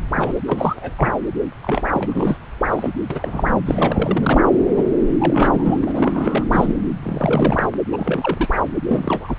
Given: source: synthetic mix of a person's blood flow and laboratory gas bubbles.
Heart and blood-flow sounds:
Doppler ultrasound of blood flow; subclavian vein
0.14-0.32 s: bubbles
0.45-1.14 s: bubbles
1.63-2.37 s: bubbles
2.70-2.90 s: bubbles
3.10-3.49 s: bubbles
3.66-4.41 s: bubbles
4.77-4.85 s: bubbles
5.07-5.78 s: bubbles
5.83-6.44 s: bubbles
6.50-6.74 s: bubbles
7.03-7.68 s: bubbles
7.92-8.48 s: bubbles
8.88-9.36 s: bubbles
From the record:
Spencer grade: 3 (all of the cardiac periods contain showers or single bubble signals, but not dominating or overriding the cardiac motion signals); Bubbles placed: anywhere in the cardiac cycle

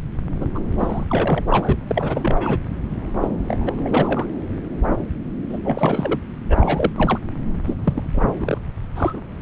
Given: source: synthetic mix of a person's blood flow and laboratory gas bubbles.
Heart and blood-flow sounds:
Doppler ultrasound of blood flow; subclavian vein
0.41-0.46 s: bubbles
0.55-0.59 s: bubbles
0.78-1.05 s: bubbles
1.10-1.43 s: bubbles
1.50-1.74 s: bubbles
1.87-2.58 s: bubbles
3.20-3.28 s: bubbles
3.38-3.75 s: bubbles
3.78-4.26 s: bubbles
5.49-5.60 s: bubbles
5.65-6.19 s: bubbles
6.49-6.91 s: bubbles
6.96-7.19 s: bubbles
7.66-7.74 s: bubbles
7.83-8.58 s: bubbles
8.95-9.21 s: bubbles
From the record:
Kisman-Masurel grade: 332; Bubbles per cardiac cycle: rolling drumbeat, 9 or more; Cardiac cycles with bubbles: 50 to 99%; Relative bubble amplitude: moderate (0.250 to 0.450); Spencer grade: 3 (all of the cardiac periods contain showers or single bubble signals, but not dominating or overriding the cardiac motion signals); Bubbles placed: anywhere in the cardiac cycle

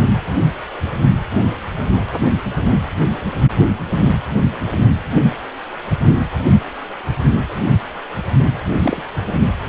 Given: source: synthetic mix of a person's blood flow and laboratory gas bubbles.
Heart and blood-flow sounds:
Doppler ultrasound of blood flow; precordium
8.79-9.03 s: bubbles
From the record:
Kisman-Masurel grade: 222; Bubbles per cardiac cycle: several, 3 to 8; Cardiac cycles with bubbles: 10 to 50%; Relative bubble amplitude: moderate (0.250 to 0.450); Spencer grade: 2 (many but less than half of the cardiac periods contain bubble signals, singularly or in groups); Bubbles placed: anywhere in the cardiac cycle

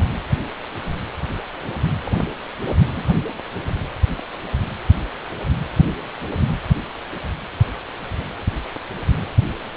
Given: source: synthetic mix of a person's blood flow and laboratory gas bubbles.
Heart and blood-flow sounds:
Doppler ultrasound of blood flow; precordium
2.03-2.13 s: bubbles
2.95-3.04 s: bubbles
From the record:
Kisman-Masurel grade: 111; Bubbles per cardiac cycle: 1 to 2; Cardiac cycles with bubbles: 1 to 10%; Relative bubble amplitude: barely perceptible (0.100 to 0.250); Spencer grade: 1 (occasional bubble signal discernible with the cardiac motion signal, with majority of cardiac periods free of bubbles); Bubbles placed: anywhere in the cardiac cycle

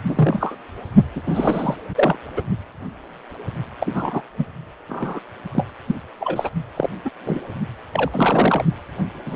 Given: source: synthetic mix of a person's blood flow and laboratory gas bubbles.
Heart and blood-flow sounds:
Doppler ultrasound of blood flow; precordium
0.04-0.56 s: bubbles
1.15-1.21 s: bubbles
1.25-1.76 s: bubbles
1.95-2.17 s: bubbles
2.36-2.42 s: bubbles
3.80-4.21 s: bubbles
4.37-4.45 s: bubbles
4.89-5.20 s: bubbles
5.52-5.66 s: bubbles
5.88-5.95 s: bubbles
6.20-6.49 s: bubbles
6.76-6.89 s: bubbles
7.04-7.10 s: bubbles
7.25-7.41 s: bubbles
7.93-8.64 s: bubbles
9.25-9.35 s: bubbles
From the record:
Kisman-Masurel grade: 232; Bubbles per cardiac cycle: several, 3 to 8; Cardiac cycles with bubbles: 50 to 99%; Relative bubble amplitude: moderate (0.250 to 0.450); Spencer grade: 3 (all of the cardiac periods contain showers or single bubble signals, but not dominating or overriding the cardiac motion signals); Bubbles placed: only in the low amplitude regions of the cardiac cycle

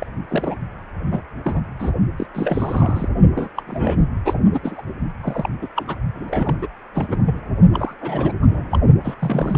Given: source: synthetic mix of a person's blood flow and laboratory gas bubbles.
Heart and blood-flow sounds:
Doppler ultrasound of blood flow; precordium
0.00-0.07 s: bubbles
0.29-0.58 s: bubbles
1.11-1.22 s: bubbles
1.45-1.61 s: bubbles
1.79-1.91 s: bubbles
2.17-2.26 s: bubbles
2.34-3.08 s: bubbles
3.35-3.50 s: bubbles
3.56-3.62 s: bubbles
3.67-3.99 s: bubbles
4.25-4.33 s: bubbles
4.53-4.59 s: bubbles
4.62-4.82 s: bubbles
5.23-5.50 s: bubbles
5.62-5.67 s: bubbles
5.75-5.96 s: bubbles
6.15-6.55 s: bubbles
6.59-6.67 s: bubbles
6.95-7.39 s: bubbles
7.73-7.94 s: bubbles
8.01-8.32 s: bubbles
8.42-8.78 s: bubbles
9.04-9.14 s: bubbles
9.19-9.58 s: bubbles
From the record:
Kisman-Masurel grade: 342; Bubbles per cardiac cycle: rolling drumbeat, 9 or more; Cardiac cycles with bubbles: 100%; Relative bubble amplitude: moderate (0.250 to 0.450); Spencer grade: 3 (all of the cardiac periods contain showers or single bubble signals, but not dominating or overriding the cardiac motion signals); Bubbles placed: only in the low amplitude regions of the cardiac cycle

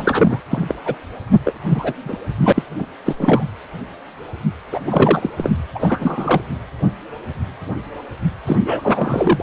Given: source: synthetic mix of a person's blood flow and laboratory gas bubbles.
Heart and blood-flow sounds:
Doppler ultrasound of blood flow; precordium
0.00-0.41 s: bubbles
0.50-0.74 s: bubbles
0.85-0.96 s: bubbles
1.45-1.52 s: bubbles
1.70-1.94 s: bubbles
2.04-2.17 s: bubbles
2.38-2.53 s: bubbles
2.55-2.62 s: bubbles
2.79-2.88 s: bubbles
3.05-3.14 s: bubbles
3.17-3.43 s: bubbles
4.72-4.79 s: bubbles
4.83-5.31 s: bubbles
5.38-5.50 s: bubbles
5.75-6.43 s: bubbles
8.46-9.43 s: bubbles
From the record:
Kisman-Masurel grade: 333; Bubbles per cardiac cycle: rolling drumbeat, 9 or more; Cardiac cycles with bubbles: 50 to 99%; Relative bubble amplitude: loud (0.450 to 0.775); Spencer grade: 3 (all of the cardiac periods contain showers or single bubble signals, but not dominating or overriding the cardiac motion signals); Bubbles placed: anywhere in the cardiac cycle

